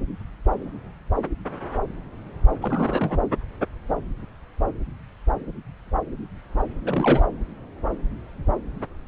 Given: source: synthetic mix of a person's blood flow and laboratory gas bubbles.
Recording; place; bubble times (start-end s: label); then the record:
Doppler ultrasound of blood flow; subclavian vein
2.61-3.17 s: bubbles
6.85-7.26 s: bubbles
From the record:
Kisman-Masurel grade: 211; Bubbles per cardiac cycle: several, 3 to 8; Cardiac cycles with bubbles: 1 to 10%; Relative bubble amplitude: barely perceptible (0.100 to 0.250); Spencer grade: 1 (occasional bubble signal discernible with the cardiac motion signal, with majority of cardiac periods free of bubbles); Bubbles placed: anywhere in the cardiac cycle